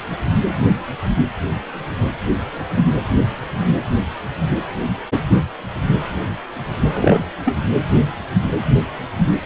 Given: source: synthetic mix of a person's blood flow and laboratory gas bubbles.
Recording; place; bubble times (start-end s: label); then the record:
Doppler ultrasound of blood flow; precordium
6.93-7.28 s: bubbles
7.45-7.57 s: bubbles
From the record:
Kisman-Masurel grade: 213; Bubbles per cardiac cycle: several, 3 to 8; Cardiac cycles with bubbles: 1 to 10%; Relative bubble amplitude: loud (0.450 to 0.775); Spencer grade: 1 (occasional bubble signal discernible with the cardiac motion signal, with majority of cardiac periods free of bubbles); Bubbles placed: anywhere in the cardiac cycle